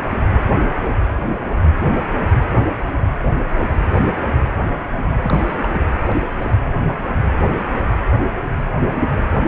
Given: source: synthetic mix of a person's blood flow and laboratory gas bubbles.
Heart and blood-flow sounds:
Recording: Doppler ultrasound of blood flow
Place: precordium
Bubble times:
5.22-5.78 s: bubbles
6.06-6.24 s: bubbles
6.42-6.51 s: bubbles
From the record:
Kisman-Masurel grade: 221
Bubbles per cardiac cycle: several, 3 to 8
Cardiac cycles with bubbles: 10 to 50%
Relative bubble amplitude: barely perceptible (0.100 to 0.250)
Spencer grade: 2 (many but less than half of the cardiac periods contain bubble signals, singularly or in groups)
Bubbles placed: anywhere in the cardiac cycle

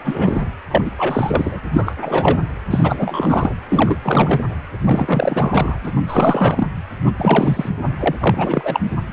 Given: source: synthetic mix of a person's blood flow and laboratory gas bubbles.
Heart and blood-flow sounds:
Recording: Doppler ultrasound of blood flow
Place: precordium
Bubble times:
0.04-0.45 s: bubbles
0.71-0.82 s: bubbles
0.85-0.91 s: bubbles
0.97-1.61 s: bubbles
1.73-1.96 s: bubbles
2.01-2.38 s: bubbles
2.70-3.55 s: bubbles
3.68-3.99 s: bubbles
4.02-4.44 s: bubbles
4.84-5.78 s: bubbles
5.83-5.92 s: bubbles
5.96-6.02 s: bubbles
6.07-6.67 s: bubbles
7.04-7.11 s: bubbles
7.17-7.69 s: bubbles
7.99-8.16 s: bubbles
8.20-8.80 s: bubbles
8.91-8.96 s: bubbles
From the record:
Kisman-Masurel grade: 343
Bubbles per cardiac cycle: rolling drumbeat, 9 or more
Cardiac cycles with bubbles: 100%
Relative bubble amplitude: loud (0.450 to 0.775)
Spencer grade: 3 (all of the cardiac periods contain showers or single bubble signals, but not dominating or overriding the cardiac motion signals)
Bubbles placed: anywhere in the cardiac cycle

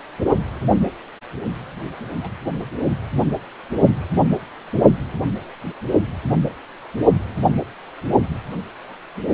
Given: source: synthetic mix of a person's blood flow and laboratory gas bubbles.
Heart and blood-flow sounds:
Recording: Doppler ultrasound of blood flow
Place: precordium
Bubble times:
2.21-2.30 s: bubbles
2.42-2.51 s: bubbles
From the record:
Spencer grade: 2 (many but less than half of the cardiac periods contain bubble signals, singularly or in groups)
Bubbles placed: only in the low amplitude regions of the cardiac cycle

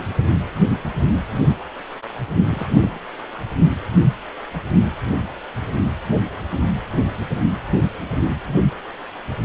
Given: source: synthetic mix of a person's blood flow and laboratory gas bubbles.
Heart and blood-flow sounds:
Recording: Doppler ultrasound of blood flow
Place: precordium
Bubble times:
2.51-3.00 s: bubbles
From the record:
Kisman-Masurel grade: 211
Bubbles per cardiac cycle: several, 3 to 8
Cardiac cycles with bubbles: 1 to 10%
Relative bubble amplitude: barely perceptible (0.100 to 0.250)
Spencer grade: 1 (occasional bubble signal discernible with the cardiac motion signal, with majority of cardiac periods free of bubbles)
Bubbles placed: only in the low amplitude regions of the cardiac cycle

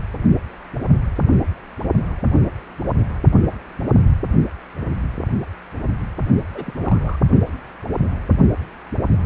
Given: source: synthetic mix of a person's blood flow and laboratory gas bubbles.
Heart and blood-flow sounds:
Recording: Doppler ultrasound of blood flow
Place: precordium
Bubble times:
6.54-7.17 s: bubbles
From the record:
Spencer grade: 1 (occasional bubble signal discernible with the cardiac motion signal, with majority of cardiac periods free of bubbles)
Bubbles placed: only in the low amplitude regions of the cardiac cycle

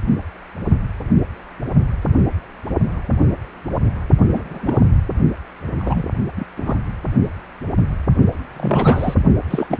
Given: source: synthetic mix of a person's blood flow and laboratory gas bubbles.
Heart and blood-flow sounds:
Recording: Doppler ultrasound of blood flow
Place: precordium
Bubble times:
4.33-4.82 s: bubbles
5.79-6.03 s: bubbles
6.37-6.45 s: bubbles
6.57-6.79 s: bubbles
8.56-9.14 s: bubbles
9.50-9.67 s: bubbles
9.70-9.78 s: bubbles
From the record:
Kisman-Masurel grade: 222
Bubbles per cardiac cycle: several, 3 to 8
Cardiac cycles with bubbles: 10 to 50%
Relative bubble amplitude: moderate (0.250 to 0.450)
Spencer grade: 2 (many but less than half of the cardiac periods contain bubble signals, singularly or in groups)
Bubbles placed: only in the low amplitude regions of the cardiac cycle

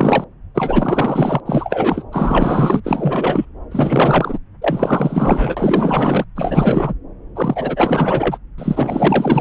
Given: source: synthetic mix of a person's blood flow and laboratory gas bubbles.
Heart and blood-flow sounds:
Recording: Doppler ultrasound of blood flow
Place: subclavian vein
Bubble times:
0.00-0.24 s: bubbles
0.54-1.40 s: bubbles
1.45-2.05 s: bubbles
2.12-2.81 s: bubbles
2.84-3.45 s: bubbles
3.71-4.38 s: bubbles
4.62-6.25 s: bubbles
6.36-6.94 s: bubbles
7.36-8.38 s: bubbles
8.58-9.41 s: bubbles
From the record:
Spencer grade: 4 (maximum detectable bubble signal sounding continuously throughout systole and diastole of every cardiac period, and overriding the amplitude of the normal cardiac signals)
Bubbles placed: anywhere in the cardiac cycle

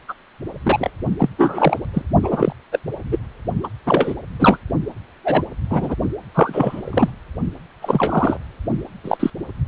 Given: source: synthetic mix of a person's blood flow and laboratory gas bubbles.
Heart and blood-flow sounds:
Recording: Doppler ultrasound of blood flow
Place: precordium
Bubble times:
0.08-0.14 s: bubbles
0.63-0.91 s: bubbles
1.19-1.29 s: bubbles
1.38-1.79 s: bubbles
1.93-2.01 s: bubbles
2.22-2.53 s: bubbles
2.72-2.79 s: bubbles
3.12-3.18 s: bubbles
3.63-3.67 s: bubbles
3.86-4.14 s: bubbles
4.39-4.58 s: bubbles
5.24-5.44 s: bubbles
5.69-5.95 s: bubbles
6.34-7.11 s: bubbles
7.81-8.38 s: bubbles
9.04-9.30 s: bubbles
From the record:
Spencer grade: 3 (all of the cardiac periods contain showers or single bubble signals, but not dominating or overriding the cardiac motion signals)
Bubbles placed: only in the low amplitude regions of the cardiac cycle

